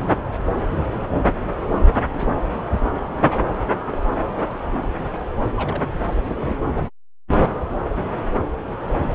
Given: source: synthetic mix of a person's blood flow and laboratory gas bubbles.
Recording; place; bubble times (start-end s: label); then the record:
Doppler ultrasound of blood flow; subclavian vein
2.14-2.33 s: bubbles
3.91-4.02 s: bubbles
5.55-5.84 s: bubbles
6.41-6.58 s: bubbles
7.61-7.80 s: bubbles
From the record:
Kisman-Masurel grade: 121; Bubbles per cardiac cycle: 1 to 2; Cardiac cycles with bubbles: 10 to 50%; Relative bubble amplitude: barely perceptible (0.100 to 0.250); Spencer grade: 2 (many but less than half of the cardiac periods contain bubble signals, singularly or in groups); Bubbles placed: anywhere in the cardiac cycle